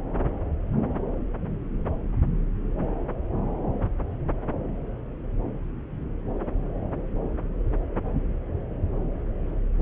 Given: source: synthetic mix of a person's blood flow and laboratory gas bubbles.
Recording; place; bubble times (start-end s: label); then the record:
Doppler ultrasound of blood flow; subclavian vein
no bubbles
From the record:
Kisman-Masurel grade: 000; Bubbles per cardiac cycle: 0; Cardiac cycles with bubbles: 0%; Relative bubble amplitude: no bubbles discernible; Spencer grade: 0 (complete lack of bubble signals)